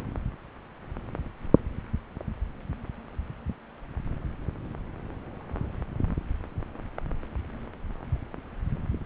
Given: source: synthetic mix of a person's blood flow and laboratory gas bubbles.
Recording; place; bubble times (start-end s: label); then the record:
Doppler ultrasound of blood flow; subclavian vein
no bubbles
From the record:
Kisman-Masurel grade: 000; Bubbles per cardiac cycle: 0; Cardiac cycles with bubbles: 0%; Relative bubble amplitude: no bubbles discernible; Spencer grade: 0 (complete lack of bubble signals)